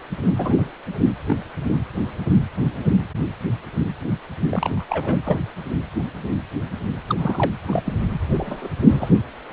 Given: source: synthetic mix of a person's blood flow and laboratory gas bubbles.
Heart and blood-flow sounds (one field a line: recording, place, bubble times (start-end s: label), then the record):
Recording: Doppler ultrasound of blood flow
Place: precordium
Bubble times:
0.38-0.69 s: bubbles
1.26-1.37 s: bubbles
4.51-4.86 s: bubbles
4.89-5.17 s: bubbles
5.24-5.38 s: bubbles
7.09-7.16 s: bubbles
7.18-7.51 s: bubbles
7.67-7.93 s: bubbles
8.34-8.69 s: bubbles
8.88-9.12 s: bubbles
From the record:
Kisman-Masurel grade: 232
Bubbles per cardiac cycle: several, 3 to 8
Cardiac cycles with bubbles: 50 to 99%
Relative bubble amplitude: moderate (0.250 to 0.450)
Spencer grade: 3 (all of the cardiac periods contain showers or single bubble signals, but not dominating or overriding the cardiac motion signals)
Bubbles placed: anywhere in the cardiac cycle